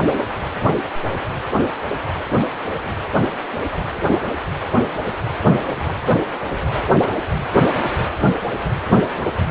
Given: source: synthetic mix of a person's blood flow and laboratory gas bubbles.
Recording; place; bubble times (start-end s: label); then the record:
Doppler ultrasound of blood flow; precordium
0.05-0.33 s: bubbles
5.48-5.99 s: bubbles
From the record:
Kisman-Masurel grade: 121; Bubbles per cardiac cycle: 1 to 2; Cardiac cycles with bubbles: 10 to 50%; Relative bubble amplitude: barely perceptible (0.100 to 0.250); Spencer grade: 2 (many but less than half of the cardiac periods contain bubble signals, singularly or in groups); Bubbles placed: anywhere in the cardiac cycle